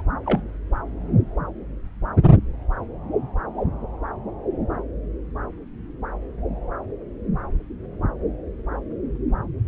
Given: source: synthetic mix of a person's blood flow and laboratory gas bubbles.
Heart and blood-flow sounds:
Doppler ultrasound of blood flow; subclavian vein
0.00-0.02 s: bubbles
0.26-0.42 s: bubbles
From the record:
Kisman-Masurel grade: 212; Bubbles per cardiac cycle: several, 3 to 8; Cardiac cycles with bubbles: 1 to 10%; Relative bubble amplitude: moderate (0.250 to 0.450); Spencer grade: 1 (occasional bubble signal discernible with the cardiac motion signal, with majority of cardiac periods free of bubbles); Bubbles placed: anywhere in the cardiac cycle

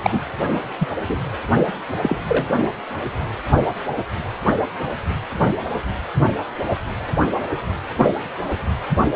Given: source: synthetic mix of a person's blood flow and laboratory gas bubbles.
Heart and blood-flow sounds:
Doppler ultrasound of blood flow; precordium
0.03-0.20 s: bubbles
0.78-0.88 s: bubbles
1.07-1.18 s: bubbles
2.03-2.17 s: bubbles
2.28-2.48 s: bubbles
7.98-8.10 s: bubbles
From the record:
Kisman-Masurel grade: 122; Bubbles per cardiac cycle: 1 to 2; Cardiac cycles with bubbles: 10 to 50%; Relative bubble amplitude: moderate (0.250 to 0.450); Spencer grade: 2 (many but less than half of the cardiac periods contain bubble signals, singularly or in groups); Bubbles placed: only in the low amplitude regions of the cardiac cycle

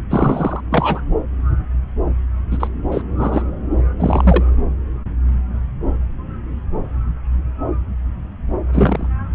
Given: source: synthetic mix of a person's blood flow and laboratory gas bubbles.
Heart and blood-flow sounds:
Doppler ultrasound of blood flow; subclavian vein
0.10-0.61 s: bubbles
0.71-1.02 s: bubbles
2.50-2.67 s: bubbles
2.91-3.03 s: bubbles
3.18-3.42 s: bubbles
3.99-4.44 s: bubbles
8.72-9.07 s: bubbles
From the record:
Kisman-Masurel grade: 223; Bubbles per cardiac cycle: several, 3 to 8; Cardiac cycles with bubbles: 10 to 50%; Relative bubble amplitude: loud (0.450 to 0.775); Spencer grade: 2 (many but less than half of the cardiac periods contain bubble signals, singularly or in groups); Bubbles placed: anywhere in the cardiac cycle

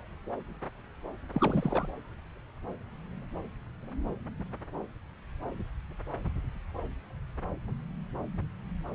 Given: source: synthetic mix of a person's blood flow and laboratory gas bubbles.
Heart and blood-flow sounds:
Doppler ultrasound of blood flow; subclavian vein
1.32-1.88 s: bubbles
From the record:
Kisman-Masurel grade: 211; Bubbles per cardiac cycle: several, 3 to 8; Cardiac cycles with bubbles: 1 to 10%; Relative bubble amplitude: barely perceptible (0.100 to 0.250); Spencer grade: 1 (occasional bubble signal discernible with the cardiac motion signal, with majority of cardiac periods free of bubbles); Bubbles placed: anywhere in the cardiac cycle

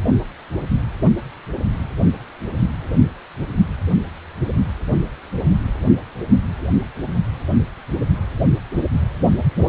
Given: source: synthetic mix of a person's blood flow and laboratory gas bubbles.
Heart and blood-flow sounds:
Doppler ultrasound of blood flow; precordium
no bubbles
From the record:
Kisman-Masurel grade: 000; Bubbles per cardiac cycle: 0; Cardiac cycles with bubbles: 0%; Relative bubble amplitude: no bubbles discernible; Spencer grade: 0 (complete lack of bubble signals)

